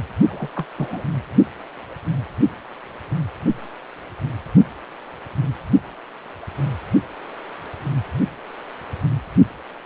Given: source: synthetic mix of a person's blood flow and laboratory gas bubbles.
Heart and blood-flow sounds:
Doppler ultrasound of blood flow; precordium
0.28-0.49 s: bubbles
0.55-0.65 s: bubbles
0.77-1.03 s: bubbles
From the record:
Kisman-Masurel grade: 211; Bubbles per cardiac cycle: several, 3 to 8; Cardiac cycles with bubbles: 1 to 10%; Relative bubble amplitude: barely perceptible (0.100 to 0.250); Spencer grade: 1 (occasional bubble signal discernible with the cardiac motion signal, with majority of cardiac periods free of bubbles); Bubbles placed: only in the low amplitude regions of the cardiac cycle

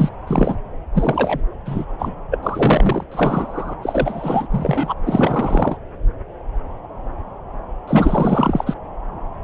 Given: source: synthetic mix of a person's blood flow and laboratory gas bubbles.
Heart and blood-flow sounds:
Doppler ultrasound of blood flow; subclavian vein
0.00-0.09 s: bubbles
0.27-0.56 s: bubbles
0.95-1.40 s: bubbles
1.66-1.85 s: bubbles
1.88-2.16 s: bubbles
2.31-2.39 s: bubbles
2.43-3.04 s: bubbles
3.11-3.74 s: bubbles
3.81-4.47 s: bubbles
4.50-4.94 s: bubbles
5.03-5.77 s: bubbles
7.87-8.74 s: bubbles
From the record:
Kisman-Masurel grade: 333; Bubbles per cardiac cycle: rolling drumbeat, 9 or more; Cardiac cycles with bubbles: 50 to 99%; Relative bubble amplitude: loud (0.450 to 0.775); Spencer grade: 3 (all of the cardiac periods contain showers or single bubble signals, but not dominating or overriding the cardiac motion signals); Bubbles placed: anywhere in the cardiac cycle

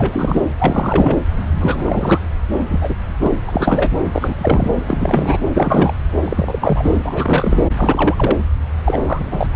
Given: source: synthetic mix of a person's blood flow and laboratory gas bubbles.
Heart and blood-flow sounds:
Doppler ultrasound of blood flow; subclavian vein
0.00-0.41 s: bubbles
0.59-1.18 s: bubbles
1.57-2.23 s: bubbles
2.61-2.63 s: bubbles
2.68-2.96 s: bubbles
3.20-3.31 s: bubbles
3.47-3.93 s: bubbles
4.12-4.70 s: bubbles
4.85-5.38 s: bubbles
5.54-5.92 s: bubbles
6.24-6.97 s: bubbles
7.04-7.70 s: bubbles
7.78-8.37 s: bubbles
8.85-8.98 s: bubbles
9.03-9.50 s: bubbles
9.53-9.56 s: bubbles
From the record:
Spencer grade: 3 (all of the cardiac periods contain showers or single bubble signals, but not dominating or overriding the cardiac motion signals); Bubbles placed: anywhere in the cardiac cycle

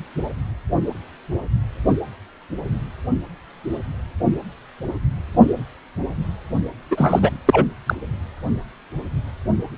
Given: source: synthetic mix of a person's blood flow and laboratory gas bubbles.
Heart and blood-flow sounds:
Doppler ultrasound of blood flow; precordium
6.91-7.30 s: bubbles
7.46-7.66 s: bubbles
7.86-7.96 s: bubbles
From the record:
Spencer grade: 2 (many but less than half of the cardiac periods contain bubble signals, singularly or in groups); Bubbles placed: only in the low amplitude regions of the cardiac cycle

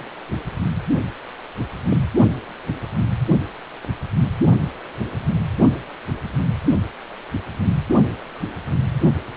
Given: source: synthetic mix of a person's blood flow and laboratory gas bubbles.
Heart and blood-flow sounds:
Doppler ultrasound of blood flow; precordium
1.85-2.01 s: bubbles
From the record:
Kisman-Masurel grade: 122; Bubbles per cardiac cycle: 1 to 2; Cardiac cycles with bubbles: 10 to 50%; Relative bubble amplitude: moderate (0.250 to 0.450); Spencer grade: 2 (many but less than half of the cardiac periods contain bubble signals, singularly or in groups); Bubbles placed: only in the low amplitude regions of the cardiac cycle

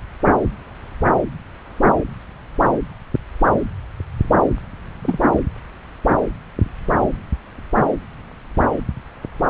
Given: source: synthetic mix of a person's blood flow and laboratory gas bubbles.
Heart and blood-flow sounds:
Doppler ultrasound of blood flow; subclavian vein
5.01-5.19 s: bubbles
From the record:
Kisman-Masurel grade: 112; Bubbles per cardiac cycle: 1 to 2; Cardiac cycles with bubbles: 1 to 10%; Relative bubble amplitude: moderate (0.250 to 0.450); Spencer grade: 1 (occasional bubble signal discernible with the cardiac motion signal, with majority of cardiac periods free of bubbles); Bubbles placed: anywhere in the cardiac cycle

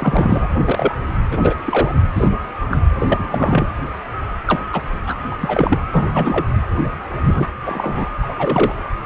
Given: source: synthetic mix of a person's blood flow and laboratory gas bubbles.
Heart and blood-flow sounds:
Doppler ultrasound of blood flow; precordium
0.00-0.48 s: bubbles
0.65-0.97 s: bubbles
1.31-1.54 s: bubbles
1.65-1.92 s: bubbles
2.14-2.29 s: bubbles
2.71-2.77 s: bubbles
2.99-3.69 s: bubbles
4.46-4.62 s: bubbles
4.72-4.82 s: bubbles
5.07-5.17 s: bubbles
5.30-5.36 s: bubbles
5.41-5.79 s: bubbles
5.92-6.46 s: bubbles
7.22-7.46 s: bubbles
7.65-8.10 s: bubbles
8.22-8.73 s: bubbles
From the record:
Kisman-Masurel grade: 233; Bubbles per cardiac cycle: several, 3 to 8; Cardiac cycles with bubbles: 50 to 99%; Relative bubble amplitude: loud (0.450 to 0.775); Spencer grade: 3 (all of the cardiac periods contain showers or single bubble signals, but not dominating or overriding the cardiac motion signals); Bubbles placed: anywhere in the cardiac cycle

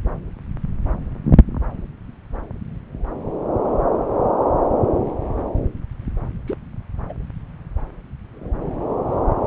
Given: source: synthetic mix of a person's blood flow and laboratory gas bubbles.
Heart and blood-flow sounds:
Doppler ultrasound of blood flow; subclavian vein
6.46-6.56 s: bubbles
7.09-7.13 s: bubbles
From the record:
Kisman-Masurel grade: 111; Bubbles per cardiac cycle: 1 to 2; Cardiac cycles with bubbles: 1 to 10%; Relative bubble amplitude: barely perceptible (0.100 to 0.250); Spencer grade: 1 (occasional bubble signal discernible with the cardiac motion signal, with majority of cardiac periods free of bubbles); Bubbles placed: anywhere in the cardiac cycle

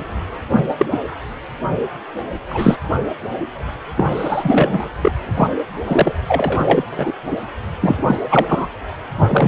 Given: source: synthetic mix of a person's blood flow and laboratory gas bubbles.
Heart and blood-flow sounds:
Doppler ultrasound of blood flow; precordium
0.00-0.04 s: bubbles
0.57-0.64 s: bubbles
0.79-0.85 s: bubbles
0.91-0.97 s: bubbles
2.50-2.77 s: bubbles
3.97-4.05 s: bubbles
4.10-4.89 s: bubbles
5.02-5.12 s: bubbles
5.34-5.48 s: bubbles
5.85-6.14 s: bubbles
6.28-6.84 s: bubbles
6.92-7.11 s: bubbles
7.31-7.37 s: bubbles
7.82-8.16 s: bubbles
8.30-8.46 s: bubbles
8.48-8.68 s: bubbles
9.28-9.48 s: bubbles
From the record:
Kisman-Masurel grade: 243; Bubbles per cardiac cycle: several, 3 to 8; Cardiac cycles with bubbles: 100%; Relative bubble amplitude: loud (0.450 to 0.775); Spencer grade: 3 (all of the cardiac periods contain showers or single bubble signals, but not dominating or overriding the cardiac motion signals); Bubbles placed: anywhere in the cardiac cycle

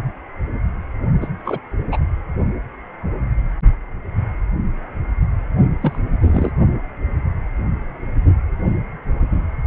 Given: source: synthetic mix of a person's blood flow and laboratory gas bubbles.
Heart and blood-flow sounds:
Doppler ultrasound of blood flow; precordium
1.21-1.28 s: bubbles
1.45-1.59 s: bubbles
1.92-1.97 s: bubbles
5.81-5.99 s: bubbles
6.22-6.52 s: bubbles
From the record:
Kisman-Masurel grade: 222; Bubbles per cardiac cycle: several, 3 to 8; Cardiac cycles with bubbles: 10 to 50%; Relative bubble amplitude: moderate (0.250 to 0.450); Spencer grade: 2 (many but less than half of the cardiac periods contain bubble signals, singularly or in groups); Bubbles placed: only in the low amplitude regions of the cardiac cycle

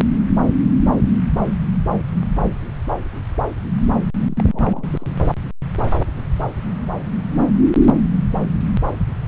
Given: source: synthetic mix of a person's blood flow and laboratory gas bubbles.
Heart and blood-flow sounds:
Doppler ultrasound of blood flow; subclavian vein
4.19-5.18 s: bubbles
From the record:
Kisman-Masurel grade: 211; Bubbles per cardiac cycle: several, 3 to 8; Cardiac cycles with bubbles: 1 to 10%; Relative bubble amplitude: barely perceptible (0.100 to 0.250); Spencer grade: 1 (occasional bubble signal discernible with the cardiac motion signal, with majority of cardiac periods free of bubbles); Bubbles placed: anywhere in the cardiac cycle

